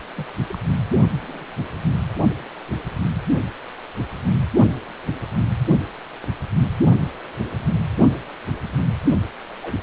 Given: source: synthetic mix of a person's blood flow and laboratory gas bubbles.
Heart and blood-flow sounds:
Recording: Doppler ultrasound of blood flow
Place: precordium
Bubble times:
0.17-0.30 s: bubbles
0.42-0.58 s: bubbles
1.17-1.44 s: bubbles
9.62-9.83 s: bubbles
From the record:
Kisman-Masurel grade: 121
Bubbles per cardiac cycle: 1 to 2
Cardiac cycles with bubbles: 10 to 50%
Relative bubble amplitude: barely perceptible (0.100 to 0.250)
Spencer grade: 2 (many but less than half of the cardiac periods contain bubble signals, singularly or in groups)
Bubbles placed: only in the low amplitude regions of the cardiac cycle

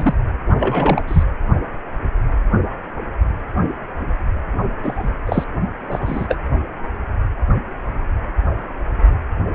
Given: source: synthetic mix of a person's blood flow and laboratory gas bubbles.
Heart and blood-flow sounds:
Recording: Doppler ultrasound of blood flow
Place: precordium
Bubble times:
0.00-0.14 s: bubbles
0.59-1.04 s: bubbles
1.07-1.23 s: bubbles
4.83-5.10 s: bubbles
5.26-5.44 s: bubbles
5.87-6.37 s: bubbles
From the record:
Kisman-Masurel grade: 232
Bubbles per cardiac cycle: several, 3 to 8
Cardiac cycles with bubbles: 50 to 99%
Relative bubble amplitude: moderate (0.250 to 0.450)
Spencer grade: 3 (all of the cardiac periods contain showers or single bubble signals, but not dominating or overriding the cardiac motion signals)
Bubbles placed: only in the low amplitude regions of the cardiac cycle

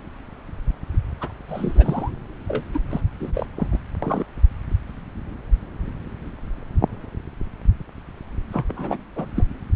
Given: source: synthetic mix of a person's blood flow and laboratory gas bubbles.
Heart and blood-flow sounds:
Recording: Doppler ultrasound of blood flow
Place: subclavian vein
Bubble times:
1.20-1.31 s: bubbles
1.48-2.10 s: bubbles
2.48-2.63 s: bubbles
2.74-2.80 s: bubbles
2.90-3.01 s: bubbles
3.19-3.46 s: bubbles
3.56-3.68 s: bubbles
3.72-3.79 s: bubbles
4.02-4.25 s: bubbles
8.51-8.64 s: bubbles
8.68-8.97 s: bubbles
9.16-9.29 s: bubbles
9.35-9.46 s: bubbles
From the record:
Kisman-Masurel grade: 232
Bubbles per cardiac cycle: several, 3 to 8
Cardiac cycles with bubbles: 50 to 99%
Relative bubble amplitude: moderate (0.250 to 0.450)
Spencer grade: 3 (all of the cardiac periods contain showers or single bubble signals, but not dominating or overriding the cardiac motion signals)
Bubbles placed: anywhere in the cardiac cycle

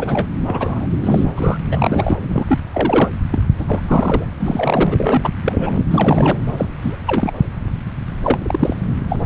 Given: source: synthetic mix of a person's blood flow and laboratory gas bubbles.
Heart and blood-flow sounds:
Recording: Doppler ultrasound of blood flow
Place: subclavian vein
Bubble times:
0.00-0.27 s: bubbles
0.42-0.87 s: bubbles
1.04-1.25 s: bubbles
1.35-1.58 s: bubbles
1.72-2.18 s: bubbles
2.21-2.58 s: bubbles
2.74-3.10 s: bubbles
3.31-3.42 s: bubbles
3.58-3.66 s: bubbles
3.68-4.26 s: bubbles
4.40-4.87 s: bubbles
4.91-5.30 s: bubbles
5.44-5.71 s: bubbles
5.75-5.85 s: bubbles
5.90-6.37 s: bubbles
6.57-6.67 s: bubbles
6.82-6.96 s: bubbles
7.07-7.33 s: bubbles
8.24-8.76 s: bubbles
9.09-9.22 s: bubbles
From the record:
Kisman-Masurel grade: 232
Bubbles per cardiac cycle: several, 3 to 8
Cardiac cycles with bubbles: 50 to 99%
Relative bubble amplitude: moderate (0.250 to 0.450)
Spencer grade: 3 (all of the cardiac periods contain showers or single bubble signals, but not dominating or overriding the cardiac motion signals)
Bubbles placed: anywhere in the cardiac cycle

